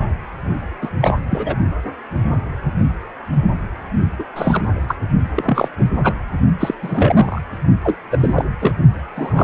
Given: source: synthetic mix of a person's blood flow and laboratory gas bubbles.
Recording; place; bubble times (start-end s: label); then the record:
Doppler ultrasound of blood flow; precordium
0.81-0.89 s: bubbles
1.01-1.14 s: bubbles
1.30-1.55 s: bubbles
4.19-4.25 s: bubbles
4.35-4.63 s: bubbles
4.88-4.96 s: bubbles
5.36-5.69 s: bubbles
5.79-5.86 s: bubbles
6.03-6.14 s: bubbles
6.59-6.74 s: bubbles
6.82-7.42 s: bubbles
7.84-7.96 s: bubbles
8.11-8.45 s: bubbles
8.61-8.74 s: bubbles
9.15-9.44 s: bubbles
From the record:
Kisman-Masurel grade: 233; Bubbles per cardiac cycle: several, 3 to 8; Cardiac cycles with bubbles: 50 to 99%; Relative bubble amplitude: loud (0.450 to 0.775); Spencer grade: 3 (all of the cardiac periods contain showers or single bubble signals, but not dominating or overriding the cardiac motion signals); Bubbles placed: only in the low amplitude regions of the cardiac cycle